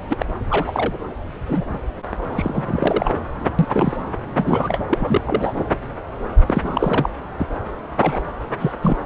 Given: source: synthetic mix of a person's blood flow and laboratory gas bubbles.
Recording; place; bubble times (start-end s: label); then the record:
Doppler ultrasound of blood flow; subclavian vein
0.09-0.22 s: bubbles
0.49-0.94 s: bubbles
1.47-1.65 s: bubbles
1.73-1.78 s: bubbles
2.35-3.15 s: bubbles
3.58-3.97 s: bubbles
4.36-4.83 s: bubbles
4.89-5.21 s: bubbles
5.26-5.53 s: bubbles
6.47-7.09 s: bubbles
7.38-7.46 s: bubbles
7.97-8.23 s: bubbles
8.59-8.73 s: bubbles
8.81-8.97 s: bubbles
From the record:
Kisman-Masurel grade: 232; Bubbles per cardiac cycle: several, 3 to 8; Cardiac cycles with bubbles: 50 to 99%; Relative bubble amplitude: moderate (0.250 to 0.450); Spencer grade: 3 (all of the cardiac periods contain showers or single bubble signals, but not dominating or overriding the cardiac motion signals); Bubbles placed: anywhere in the cardiac cycle